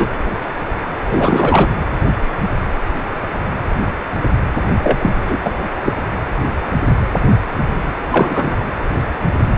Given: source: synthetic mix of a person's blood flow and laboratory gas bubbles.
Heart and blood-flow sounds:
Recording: Doppler ultrasound of blood flow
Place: precordium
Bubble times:
0.00-0.10 s: bubbles
1.05-1.69 s: bubbles
4.83-4.99 s: bubbles
5.01-5.12 s: bubbles
5.27-5.37 s: bubbles
5.44-5.57 s: bubbles
5.85-5.93 s: bubbles
8.12-8.58 s: bubbles
From the record:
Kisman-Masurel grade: 223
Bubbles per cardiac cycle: several, 3 to 8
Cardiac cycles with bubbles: 10 to 50%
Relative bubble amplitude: loud (0.450 to 0.775)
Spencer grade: 2 (many but less than half of the cardiac periods contain bubble signals, singularly or in groups)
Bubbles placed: anywhere in the cardiac cycle

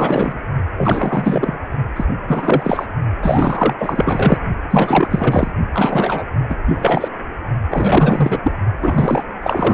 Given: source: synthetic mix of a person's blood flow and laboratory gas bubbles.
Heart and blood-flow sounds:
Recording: Doppler ultrasound of blood flow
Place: precordium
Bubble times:
0.00-0.38 s: bubbles
0.77-1.59 s: bubbles
1.96-2.05 s: bubbles
2.27-2.89 s: bubbles
3.22-3.74 s: bubbles
3.78-4.38 s: bubbles
4.70-5.51 s: bubbles
5.74-6.24 s: bubbles
6.50-6.55 s: bubbles
6.66-7.08 s: bubbles
7.70-8.40 s: bubbles
8.43-8.52 s: bubbles
8.81-9.23 s: bubbles
9.43-9.74 s: bubbles
From the record:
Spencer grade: 4 (maximum detectable bubble signal sounding continuously throughout systole and diastole of every cardiac period, and overriding the amplitude of the normal cardiac signals)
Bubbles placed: only in the low amplitude regions of the cardiac cycle

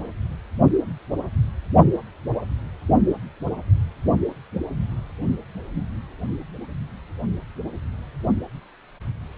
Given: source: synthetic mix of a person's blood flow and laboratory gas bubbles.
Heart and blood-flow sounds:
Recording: Doppler ultrasound of blood flow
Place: precordium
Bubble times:
no bubbles
From the record:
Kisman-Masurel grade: 000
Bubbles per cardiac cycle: 0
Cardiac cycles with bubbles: 0%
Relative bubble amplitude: no bubbles discernible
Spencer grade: 0 (complete lack of bubble signals)

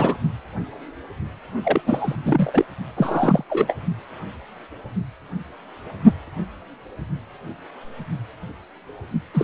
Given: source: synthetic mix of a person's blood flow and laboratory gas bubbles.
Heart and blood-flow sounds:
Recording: Doppler ultrasound of blood flow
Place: precordium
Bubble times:
0.00-0.16 s: bubbles
1.64-1.81 s: bubbles
1.87-2.15 s: bubbles
2.23-2.65 s: bubbles
2.96-3.44 s: bubbles
3.50-3.75 s: bubbles
9.34-9.43 s: bubbles
From the record:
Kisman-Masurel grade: 332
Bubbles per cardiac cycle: rolling drumbeat, 9 or more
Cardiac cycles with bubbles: 50 to 99%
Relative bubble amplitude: moderate (0.250 to 0.450)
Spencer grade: 3 (all of the cardiac periods contain showers or single bubble signals, but not dominating or overriding the cardiac motion signals)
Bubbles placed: only in the low amplitude regions of the cardiac cycle

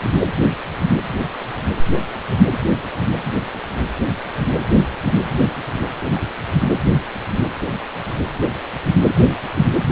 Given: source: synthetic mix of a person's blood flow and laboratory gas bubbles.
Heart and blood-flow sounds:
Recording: Doppler ultrasound of blood flow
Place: precordium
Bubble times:
6.15-6.21 s: bubbles
From the record:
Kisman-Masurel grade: 111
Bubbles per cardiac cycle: 1 to 2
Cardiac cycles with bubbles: 1 to 10%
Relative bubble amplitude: barely perceptible (0.100 to 0.250)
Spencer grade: 1 (occasional bubble signal discernible with the cardiac motion signal, with majority of cardiac periods free of bubbles)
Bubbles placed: anywhere in the cardiac cycle

